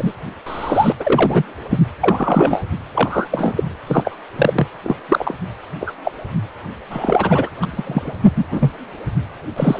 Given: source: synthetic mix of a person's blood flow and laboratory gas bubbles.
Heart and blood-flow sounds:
Doppler ultrasound of blood flow; precordium
0.00-0.12 s: bubbles
0.46-0.92 s: bubbles
0.99-1.43 s: bubbles
1.70-1.77 s: bubbles
2.00-2.62 s: bubbles
2.94-3.27 s: bubbles
3.31-3.53 s: bubbles
3.56-3.63 s: bubbles
3.86-4.18 s: bubbles
4.36-4.67 s: bubbles
4.83-4.96 s: bubbles
5.08-5.34 s: bubbles
5.80-5.92 s: bubbles
6.04-6.12 s: bubbles
6.90-7.50 s: bubbles
7.62-8.14 s: bubbles
8.35-8.44 s: bubbles
8.52-8.73 s: bubbles
9.56-9.80 s: bubbles
From the record:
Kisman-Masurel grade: 243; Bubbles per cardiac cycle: several, 3 to 8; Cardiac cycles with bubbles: 100%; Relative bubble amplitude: loud (0.450 to 0.775); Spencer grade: 3 (all of the cardiac periods contain showers or single bubble signals, but not dominating or overriding the cardiac motion signals); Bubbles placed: anywhere in the cardiac cycle

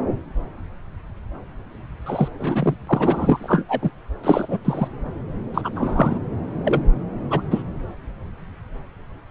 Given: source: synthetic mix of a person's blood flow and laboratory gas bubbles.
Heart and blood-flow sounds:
Doppler ultrasound of blood flow; subclavian vein
2.06-2.28 s: bubbles
2.38-2.75 s: bubbles
2.87-3.64 s: bubbles
3.69-3.90 s: bubbles
4.23-4.57 s: bubbles
4.64-4.88 s: bubbles
5.54-5.70 s: bubbles
5.75-6.19 s: bubbles
6.64-6.81 s: bubbles
7.30-7.42 s: bubbles
7.50-7.63 s: bubbles
From the record:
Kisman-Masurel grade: 233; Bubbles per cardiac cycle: several, 3 to 8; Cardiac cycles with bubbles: 50 to 99%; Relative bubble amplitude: loud (0.450 to 0.775); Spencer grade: 3 (all of the cardiac periods contain showers or single bubble signals, but not dominating or overriding the cardiac motion signals); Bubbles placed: anywhere in the cardiac cycle

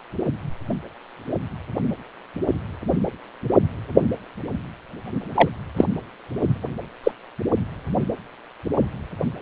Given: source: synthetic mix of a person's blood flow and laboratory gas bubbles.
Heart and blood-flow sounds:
Doppler ultrasound of blood flow; precordium
5.34-5.49 s: bubbles
5.76-5.84 s: bubbles
7.04-7.11 s: bubbles
From the record:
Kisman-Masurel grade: 123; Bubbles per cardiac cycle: 1 to 2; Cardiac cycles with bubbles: 10 to 50%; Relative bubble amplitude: loud (0.450 to 0.775); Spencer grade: 2 (many but less than half of the cardiac periods contain bubble signals, singularly or in groups); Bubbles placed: only in the low amplitude regions of the cardiac cycle

